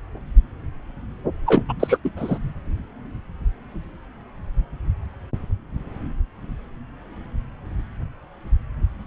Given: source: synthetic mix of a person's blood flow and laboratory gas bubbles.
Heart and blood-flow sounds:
Doppler ultrasound of blood flow; subclavian vein
1.46-1.63 s: bubbles
1.69-1.74 s: bubbles
1.80-1.98 s: bubbles
2.04-2.10 s: bubbles
2.17-2.38 s: bubbles
From the record:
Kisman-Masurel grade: 223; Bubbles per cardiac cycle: several, 3 to 8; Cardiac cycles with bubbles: 10 to 50%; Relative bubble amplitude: loud (0.450 to 0.775); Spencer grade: 2 (many but less than half of the cardiac periods contain bubble signals, singularly or in groups); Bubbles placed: anywhere in the cardiac cycle

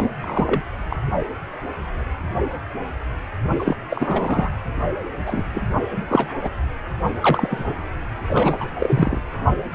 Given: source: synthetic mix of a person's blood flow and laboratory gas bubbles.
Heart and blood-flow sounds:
Doppler ultrasound of blood flow; precordium
0.00-0.10 s: bubbles
0.20-0.62 s: bubbles
0.90-1.00 s: bubbles
3.58-3.76 s: bubbles
3.89-4.50 s: bubbles
5.26-5.75 s: bubbles
6.08-6.33 s: bubbles
6.42-6.50 s: bubbles
7.21-7.74 s: bubbles
8.27-8.70 s: bubbles
8.79-9.21 s: bubbles
9.70-9.75 s: bubbles
From the record:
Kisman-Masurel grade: 233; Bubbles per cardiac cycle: several, 3 to 8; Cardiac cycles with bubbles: 50 to 99%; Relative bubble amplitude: loud (0.450 to 0.775); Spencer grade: 3 (all of the cardiac periods contain showers or single bubble signals, but not dominating or overriding the cardiac motion signals); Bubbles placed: anywhere in the cardiac cycle

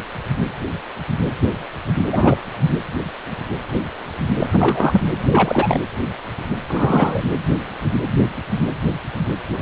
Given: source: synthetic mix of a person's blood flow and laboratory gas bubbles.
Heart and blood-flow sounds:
Doppler ultrasound of blood flow; precordium
2.12-2.38 s: bubbles
4.39-4.47 s: bubbles
4.52-5.06 s: bubbles
5.31-5.80 s: bubbles
6.68-7.23 s: bubbles
From the record:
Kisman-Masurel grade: 223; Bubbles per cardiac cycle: several, 3 to 8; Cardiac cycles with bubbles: 10 to 50%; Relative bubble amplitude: loud (0.450 to 0.775); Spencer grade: 2 (many but less than half of the cardiac periods contain bubble signals, singularly or in groups); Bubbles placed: anywhere in the cardiac cycle

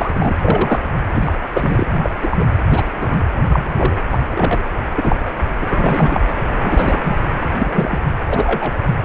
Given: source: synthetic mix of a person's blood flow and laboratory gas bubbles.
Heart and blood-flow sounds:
Doppler ultrasound of blood flow; precordium
0.00-0.35 s: bubbles
0.41-0.80 s: bubbles
1.14-1.32 s: bubbles
1.53-1.85 s: bubbles
2.02-2.10 s: bubbles
2.22-2.45 s: bubbles
2.69-2.86 s: bubbles
3.00-3.23 s: bubbles
3.52-3.74 s: bubbles
3.76-3.97 s: bubbles
4.12-4.17 s: bubbles
4.29-4.62 s: bubbles
4.95-5.16 s: bubbles
5.25-5.32 s: bubbles
5.61-6.21 s: bubbles
6.62-7.00 s: bubbles
7.03-7.16 s: bubbles
7.57-7.99 s: bubbles
8.25-8.78 s: bubbles
From the record:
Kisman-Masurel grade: 243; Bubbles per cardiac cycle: several, 3 to 8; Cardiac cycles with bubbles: 100%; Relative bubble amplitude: loud (0.450 to 0.775); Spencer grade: 3 (all of the cardiac periods contain showers or single bubble signals, but not dominating or overriding the cardiac motion signals); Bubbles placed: anywhere in the cardiac cycle

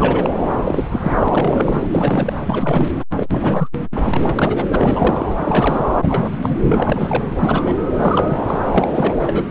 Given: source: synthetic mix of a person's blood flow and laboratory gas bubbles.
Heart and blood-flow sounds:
Doppler ultrasound of blood flow; subclavian vein
0.00-0.30 s: bubbles
0.66-0.85 s: bubbles
0.92-1.88 s: bubbles
1.91-2.33 s: bubbles
2.44-2.92 s: bubbles
3.16-3.69 s: bubbles
3.95-4.03 s: bubbles
4.05-4.67 s: bubbles
4.71-5.26 s: bubbles
5.34-5.85 s: bubbles
5.97-6.38 s: bubbles
6.42-6.55 s: bubbles
6.70-7.25 s: bubbles
7.34-7.76 s: bubbles
7.99-8.38 s: bubbles
8.47-8.57 s: bubbles
8.64-8.89 s: bubbles
8.95-9.15 s: bubbles
9.19-9.51 s: bubbles
From the record:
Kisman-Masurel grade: 343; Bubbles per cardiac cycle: rolling drumbeat, 9 or more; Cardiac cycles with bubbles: 100%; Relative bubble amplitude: loud (0.450 to 0.775); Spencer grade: 3 (all of the cardiac periods contain showers or single bubble signals, but not dominating or overriding the cardiac motion signals); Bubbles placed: anywhere in the cardiac cycle

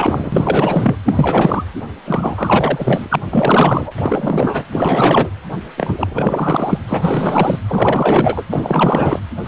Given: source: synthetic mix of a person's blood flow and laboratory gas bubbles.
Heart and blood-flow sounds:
Doppler ultrasound of blood flow; precordium
0.00-0.96 s: bubbles
1.05-1.64 s: bubbles
2.04-3.15 s: bubbles
3.30-3.93 s: bubbles
3.98-4.63 s: bubbles
4.72-5.30 s: bubbles
5.77-6.79 s: bubbles
6.88-7.58 s: bubbles
7.67-8.43 s: bubbles
8.51-9.20 s: bubbles
9.44-9.48 s: bubbles
From the record:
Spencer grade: 4 (maximum detectable bubble signal sounding continuously throughout systole and diastole of every cardiac period, and overriding the amplitude of the normal cardiac signals); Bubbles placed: anywhere in the cardiac cycle

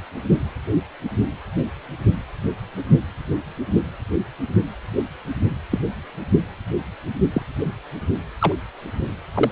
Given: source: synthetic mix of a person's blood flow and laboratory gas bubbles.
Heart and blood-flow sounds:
Doppler ultrasound of blood flow; precordium
5.71-5.79 s: bubbles
7.33-7.42 s: bubbles
8.39-8.53 s: bubbles
9.34-9.51 s: bubbles
From the record:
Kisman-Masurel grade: 122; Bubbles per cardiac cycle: 1 to 2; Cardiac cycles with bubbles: 10 to 50%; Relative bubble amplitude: moderate (0.250 to 0.450); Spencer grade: 2 (many but less than half of the cardiac periods contain bubble signals, singularly or in groups); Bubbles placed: only in the low amplitude regions of the cardiac cycle

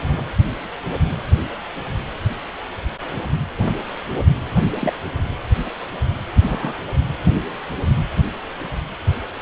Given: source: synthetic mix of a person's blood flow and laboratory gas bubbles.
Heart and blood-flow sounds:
Doppler ultrasound of blood flow; precordium
4.80-4.93 s: bubbles
6.42-6.73 s: bubbles
From the record:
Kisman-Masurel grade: 121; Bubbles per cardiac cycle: 1 to 2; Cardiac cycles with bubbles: 10 to 50%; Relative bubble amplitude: barely perceptible (0.100 to 0.250); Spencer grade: 2 (many but less than half of the cardiac periods contain bubble signals, singularly or in groups); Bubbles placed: anywhere in the cardiac cycle

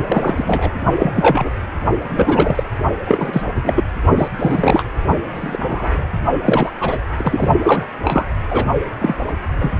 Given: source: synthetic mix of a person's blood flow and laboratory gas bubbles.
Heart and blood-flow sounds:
Doppler ultrasound of blood flow; precordium
0.07-0.71 s: bubbles
0.99-1.50 s: bubbles
2.04-2.64 s: bubbles
3.04-3.42 s: bubbles
3.64-3.83 s: bubbles
4.17-4.28 s: bubbles
4.39-4.87 s: bubbles
5.34-6.05 s: bubbles
6.44-6.71 s: bubbles
6.80-7.00 s: bubbles
7.17-7.50 s: bubbles
7.63-7.84 s: bubbles
8.02-8.25 s: bubbles
8.50-8.65 s: bubbles
8.99-9.15 s: bubbles
9.27-9.34 s: bubbles
9.59-9.73 s: bubbles
From the record:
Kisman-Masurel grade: 243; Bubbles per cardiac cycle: several, 3 to 8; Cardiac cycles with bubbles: 100%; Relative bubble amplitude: loud (0.450 to 0.775); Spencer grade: 3 (all of the cardiac periods contain showers or single bubble signals, but not dominating or overriding the cardiac motion signals); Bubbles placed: only in the low amplitude regions of the cardiac cycle

